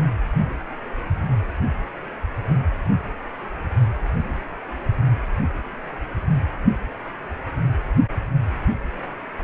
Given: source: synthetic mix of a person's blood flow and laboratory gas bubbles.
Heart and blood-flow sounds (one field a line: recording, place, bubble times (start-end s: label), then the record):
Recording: Doppler ultrasound of blood flow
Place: precordium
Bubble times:
no bubbles
From the record:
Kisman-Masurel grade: 000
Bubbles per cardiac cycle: 0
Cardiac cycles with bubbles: 0%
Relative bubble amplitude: no bubbles discernible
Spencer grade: 0 (complete lack of bubble signals)